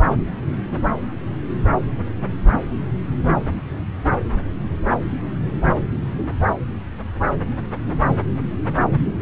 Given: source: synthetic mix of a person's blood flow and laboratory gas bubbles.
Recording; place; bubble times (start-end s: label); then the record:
Doppler ultrasound of blood flow; subclavian vein
no bubbles
From the record:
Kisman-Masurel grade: 000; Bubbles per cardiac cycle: 0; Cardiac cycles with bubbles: 0%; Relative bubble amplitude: no bubbles discernible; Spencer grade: 0 (complete lack of bubble signals)